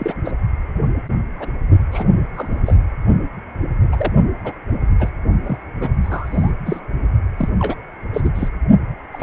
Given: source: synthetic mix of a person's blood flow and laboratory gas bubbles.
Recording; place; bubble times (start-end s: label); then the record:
Doppler ultrasound of blood flow; precordium
0.00-0.13 s: bubbles
0.25-0.32 s: bubbles
1.40-1.48 s: bubbles
1.92-2.06 s: bubbles
2.34-2.76 s: bubbles
3.92-4.12 s: bubbles
4.44-4.52 s: bubbles
4.99-5.09 s: bubbles
5.44-5.58 s: bubbles
5.80-5.89 s: bubbles
6.03-6.51 s: bubbles
6.65-6.80 s: bubbles
7.37-7.49 s: bubbles
7.59-7.76 s: bubbles
8.13-8.21 s: bubbles
8.24-8.30 s: bubbles
8.35-8.49 s: bubbles
9.12-9.23 s: bubbles
From the record:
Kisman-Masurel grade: 232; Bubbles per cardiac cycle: several, 3 to 8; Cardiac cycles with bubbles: 50 to 99%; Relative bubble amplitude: moderate (0.250 to 0.450); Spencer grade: 3 (all of the cardiac periods contain showers or single bubble signals, but not dominating or overriding the cardiac motion signals); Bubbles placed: only in the low amplitude regions of the cardiac cycle